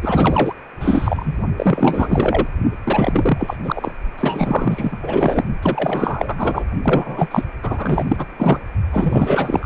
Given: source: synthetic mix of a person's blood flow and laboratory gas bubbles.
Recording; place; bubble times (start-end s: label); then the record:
Doppler ultrasound of blood flow; precordium
0.02-0.54 s: bubbles
0.80-1.36 s: bubbles
1.57-2.47 s: bubbles
2.83-3.56 s: bubbles
3.64-3.92 s: bubbles
4.17-4.97 s: bubbles
5.02-5.44 s: bubbles
5.61-6.65 s: bubbles
6.82-7.28 s: bubbles
7.31-7.44 s: bubbles
7.62-8.06 s: bubbles
8.08-8.27 s: bubbles
8.38-8.61 s: bubbles
8.92-9.65 s: bubbles
From the record:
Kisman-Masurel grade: 444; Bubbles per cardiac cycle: continuous sound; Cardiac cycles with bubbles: 100%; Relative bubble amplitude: maximal (0.775 to 0.999); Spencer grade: 4 (maximum detectable bubble signal sounding continuously throughout systole and diastole of every cardiac period, and overriding the amplitude of the normal cardiac signals); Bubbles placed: only in the low amplitude regions of the cardiac cycle